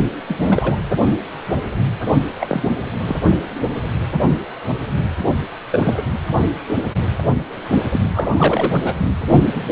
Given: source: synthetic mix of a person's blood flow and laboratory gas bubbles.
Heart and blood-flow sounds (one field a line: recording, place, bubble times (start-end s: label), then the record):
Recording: Doppler ultrasound of blood flow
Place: precordium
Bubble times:
0.28-0.78 s: bubbles
2.40-2.63 s: bubbles
3.00-3.16 s: bubbles
5.71-6.03 s: bubbles
7.92-8.72 s: bubbles
8.85-8.93 s: bubbles
9.54-9.63 s: bubbles
From the record:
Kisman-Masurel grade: 232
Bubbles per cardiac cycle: several, 3 to 8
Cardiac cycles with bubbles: 50 to 99%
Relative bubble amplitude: moderate (0.250 to 0.450)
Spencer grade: 3 (all of the cardiac periods contain showers or single bubble signals, but not dominating or overriding the cardiac motion signals)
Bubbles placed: only in the low amplitude regions of the cardiac cycle